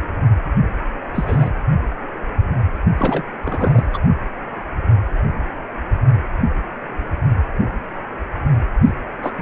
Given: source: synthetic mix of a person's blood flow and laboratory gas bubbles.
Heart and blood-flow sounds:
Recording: Doppler ultrasound of blood flow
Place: precordium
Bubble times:
1.15-1.52 s: bubbles
2.98-3.25 s: bubbles
3.42-3.85 s: bubbles
3.93-3.99 s: bubbles
8.83-8.93 s: bubbles
9.22-9.33 s: bubbles
9.37-9.42 s: bubbles
From the record:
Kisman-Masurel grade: 222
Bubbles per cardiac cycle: several, 3 to 8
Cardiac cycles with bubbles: 10 to 50%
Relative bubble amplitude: moderate (0.250 to 0.450)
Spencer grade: 2 (many but less than half of the cardiac periods contain bubble signals, singularly or in groups)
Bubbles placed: only in the low amplitude regions of the cardiac cycle

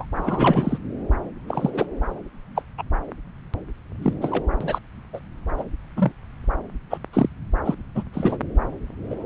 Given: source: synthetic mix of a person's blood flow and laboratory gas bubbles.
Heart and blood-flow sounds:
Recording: Doppler ultrasound of blood flow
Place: subclavian vein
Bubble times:
0.00-0.05 s: bubbles
0.15-0.78 s: bubbles
1.48-1.71 s: bubbles
1.73-1.87 s: bubbles
2.55-2.62 s: bubbles
2.77-2.83 s: bubbles
4.02-4.13 s: bubbles
4.21-4.43 s: bubbles
4.60-4.79 s: bubbles
5.13-5.19 s: bubbles
5.57-5.64 s: bubbles
5.96-6.12 s: bubbles
6.90-6.97 s: bubbles
7.13-7.29 s: bubbles
7.65-7.74 s: bubbles
7.95-8.03 s: bubbles
8.13-8.38 s: bubbles
9.09-9.15 s: bubbles
From the record:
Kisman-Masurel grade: 242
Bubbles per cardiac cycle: several, 3 to 8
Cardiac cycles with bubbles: 100%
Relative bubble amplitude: moderate (0.250 to 0.450)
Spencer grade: 3 (all of the cardiac periods contain showers or single bubble signals, but not dominating or overriding the cardiac motion signals)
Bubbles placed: anywhere in the cardiac cycle

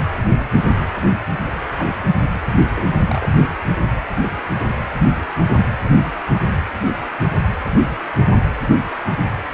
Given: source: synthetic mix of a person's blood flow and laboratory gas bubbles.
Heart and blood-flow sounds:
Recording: Doppler ultrasound of blood flow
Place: precordium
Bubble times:
0.37-0.46 s: bubbles
1.78-1.91 s: bubbles
2.75-2.84 s: bubbles
3.05-3.47 s: bubbles
6.79-6.93 s: bubbles
From the record:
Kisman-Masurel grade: 121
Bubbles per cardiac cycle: 1 to 2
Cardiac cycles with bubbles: 10 to 50%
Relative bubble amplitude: barely perceptible (0.100 to 0.250)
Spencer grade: 2 (many but less than half of the cardiac periods contain bubble signals, singularly or in groups)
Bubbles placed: anywhere in the cardiac cycle

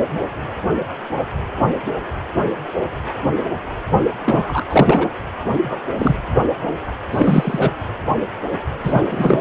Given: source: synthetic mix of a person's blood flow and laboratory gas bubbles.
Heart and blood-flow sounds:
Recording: Doppler ultrasound of blood flow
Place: precordium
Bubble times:
4.23-4.66 s: bubbles
4.70-5.07 s: bubbles
5.60-5.79 s: bubbles
5.97-6.14 s: bubbles
7.11-7.71 s: bubbles
8.83-9.03 s: bubbles
9.10-9.41 s: bubbles
From the record:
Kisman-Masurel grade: 223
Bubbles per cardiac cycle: several, 3 to 8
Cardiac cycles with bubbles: 10 to 50%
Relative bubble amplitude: loud (0.450 to 0.775)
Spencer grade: 2 (many but less than half of the cardiac periods contain bubble signals, singularly or in groups)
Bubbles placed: anywhere in the cardiac cycle

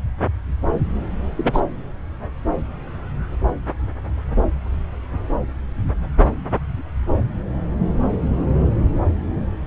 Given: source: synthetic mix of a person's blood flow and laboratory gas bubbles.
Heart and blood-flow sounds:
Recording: Doppler ultrasound of blood flow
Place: subclavian vein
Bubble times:
1.36-1.60 s: bubbles
From the record:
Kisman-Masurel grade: 122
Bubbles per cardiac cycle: 1 to 2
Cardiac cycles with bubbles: 10 to 50%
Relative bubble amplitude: moderate (0.250 to 0.450)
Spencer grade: 2 (many but less than half of the cardiac periods contain bubble signals, singularly or in groups)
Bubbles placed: anywhere in the cardiac cycle

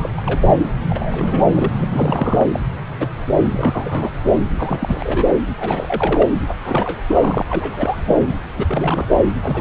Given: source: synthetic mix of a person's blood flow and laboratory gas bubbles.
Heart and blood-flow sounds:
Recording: Doppler ultrasound of blood flow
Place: subclavian vein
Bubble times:
0.00-0.09 s: bubbles
0.16-0.21 s: bubbles
0.26-0.54 s: bubbles
0.89-1.47 s: bubbles
1.54-1.70 s: bubbles
1.75-1.88 s: bubbles
1.91-2.49 s: bubbles
2.53-2.60 s: bubbles
3.00-3.07 s: bubbles
3.46-4.09 s: bubbles
4.33-4.39 s: bubbles
4.54-5.28 s: bubbles
5.57-6.29 s: bubbles
6.50-6.54 s: bubbles
6.64-7.00 s: bubbles
7.08-7.43 s: bubbles
7.49-8.01 s: bubbles
8.07-8.36 s: bubbles
8.56-9.15 s: bubbles
9.42-9.61 s: bubbles
From the record:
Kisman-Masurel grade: 342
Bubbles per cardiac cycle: rolling drumbeat, 9 or more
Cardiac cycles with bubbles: 100%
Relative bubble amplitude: moderate (0.250 to 0.450)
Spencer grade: 3 (all of the cardiac periods contain showers or single bubble signals, but not dominating or overriding the cardiac motion signals)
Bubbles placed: anywhere in the cardiac cycle

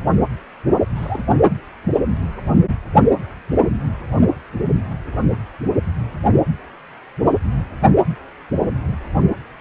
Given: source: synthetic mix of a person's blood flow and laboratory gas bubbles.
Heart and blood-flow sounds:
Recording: Doppler ultrasound of blood flow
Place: precordium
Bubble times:
0.95-1.26 s: bubbles
2.22-2.28 s: bubbles
From the record:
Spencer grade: 2 (many but less than half of the cardiac periods contain bubble signals, singularly or in groups)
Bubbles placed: only in the low amplitude regions of the cardiac cycle

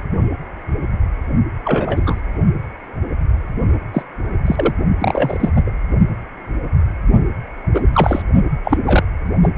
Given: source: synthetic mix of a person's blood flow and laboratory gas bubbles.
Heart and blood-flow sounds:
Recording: Doppler ultrasound of blood flow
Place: precordium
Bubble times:
1.64-2.21 s: bubbles
3.94-4.03 s: bubbles
4.46-4.73 s: bubbles
5.00-5.50 s: bubbles
5.55-5.71 s: bubbles
7.74-7.83 s: bubbles
7.92-8.22 s: bubbles
8.64-8.78 s: bubbles
8.87-9.04 s: bubbles
9.42-9.50 s: bubbles
From the record:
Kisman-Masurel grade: 233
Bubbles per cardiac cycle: several, 3 to 8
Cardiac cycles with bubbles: 50 to 99%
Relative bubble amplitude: loud (0.450 to 0.775)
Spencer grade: 3 (all of the cardiac periods contain showers or single bubble signals, but not dominating or overriding the cardiac motion signals)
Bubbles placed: only in the low amplitude regions of the cardiac cycle

